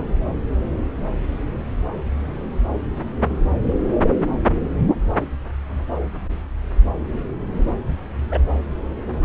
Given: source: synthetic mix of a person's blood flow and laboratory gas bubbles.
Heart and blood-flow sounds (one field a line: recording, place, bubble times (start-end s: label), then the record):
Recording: Doppler ultrasound of blood flow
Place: subclavian vein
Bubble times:
8.29-8.38 s: bubbles
From the record:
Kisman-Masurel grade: 113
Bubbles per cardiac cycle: 1 to 2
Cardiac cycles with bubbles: 1 to 10%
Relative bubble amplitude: loud (0.450 to 0.775)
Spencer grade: 1 (occasional bubble signal discernible with the cardiac motion signal, with majority of cardiac periods free of bubbles)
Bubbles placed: anywhere in the cardiac cycle